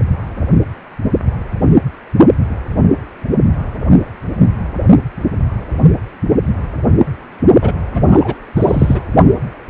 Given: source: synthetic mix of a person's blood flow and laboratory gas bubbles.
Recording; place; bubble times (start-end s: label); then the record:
Doppler ultrasound of blood flow; precordium
7.61-7.72 s: bubbles
7.93-8.36 s: bubbles
8.56-9.02 s: bubbles
From the record:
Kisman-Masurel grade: 213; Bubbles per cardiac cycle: several, 3 to 8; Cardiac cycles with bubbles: 1 to 10%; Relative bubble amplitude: loud (0.450 to 0.775); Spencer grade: 1 (occasional bubble signal discernible with the cardiac motion signal, with majority of cardiac periods free of bubbles); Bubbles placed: only in the low amplitude regions of the cardiac cycle